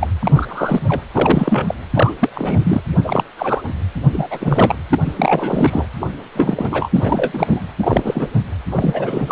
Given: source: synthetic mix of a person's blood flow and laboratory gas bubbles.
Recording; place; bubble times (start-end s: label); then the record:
Doppler ultrasound of blood flow; precordium
0.01-0.07 s: bubbles
0.20-0.32 s: bubbles
0.34-1.02 s: bubbles
1.12-1.74 s: bubbles
1.94-2.15 s: bubbles
2.21-2.29 s: bubbles
2.34-2.84 s: bubbles
3.04-3.24 s: bubbles
3.37-3.62 s: bubbles
4.12-4.27 s: bubbles
4.30-4.75 s: bubbles
4.90-4.99 s: bubbles
5.05-5.85 s: bubbles
6.00-6.07 s: bubbles
6.34-6.89 s: bubbles
6.94-7.67 s: bubbles
7.79-8.28 s: bubbles
8.32-8.42 s: bubbles
8.70-9.32 s: bubbles
From the record:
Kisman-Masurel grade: 342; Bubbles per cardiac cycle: rolling drumbeat, 9 or more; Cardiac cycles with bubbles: 100%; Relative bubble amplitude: moderate (0.250 to 0.450); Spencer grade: 3 (all of the cardiac periods contain showers or single bubble signals, but not dominating or overriding the cardiac motion signals); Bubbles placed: anywhere in the cardiac cycle